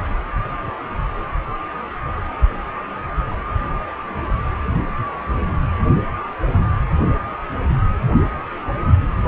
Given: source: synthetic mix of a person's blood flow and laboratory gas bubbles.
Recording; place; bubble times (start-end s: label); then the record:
Doppler ultrasound of blood flow; precordium
no bubbles
From the record:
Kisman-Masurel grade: 000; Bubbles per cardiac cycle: 0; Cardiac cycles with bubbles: 0%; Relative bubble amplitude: no bubbles discernible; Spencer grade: 0 (complete lack of bubble signals)